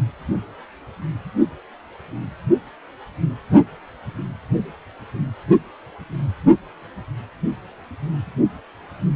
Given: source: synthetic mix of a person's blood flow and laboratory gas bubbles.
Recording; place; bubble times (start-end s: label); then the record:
Doppler ultrasound of blood flow; precordium
no bubbles
From the record:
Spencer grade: 0 (complete lack of bubble signals)